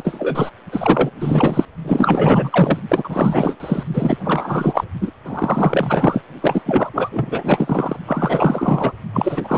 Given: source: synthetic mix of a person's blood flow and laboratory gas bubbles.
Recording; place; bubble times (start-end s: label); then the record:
Doppler ultrasound of blood flow; precordium
0.00-0.50 s: bubbles
0.71-1.10 s: bubbles
1.20-1.65 s: bubbles
1.84-2.79 s: bubbles
2.88-3.56 s: bubbles
3.60-3.83 s: bubbles
3.93-4.18 s: bubbles
4.24-4.84 s: bubbles
5.01-5.11 s: bubbles
5.25-6.21 s: bubbles
6.42-6.62 s: bubbles
6.66-6.91 s: bubbles
6.94-7.09 s: bubbles
7.12-7.97 s: bubbles
8.07-8.92 s: bubbles
9.13-9.58 s: bubbles
From the record:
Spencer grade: 4 (maximum detectable bubble signal sounding continuously throughout systole and diastole of every cardiac period, and overriding the amplitude of the normal cardiac signals); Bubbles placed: only in the low amplitude regions of the cardiac cycle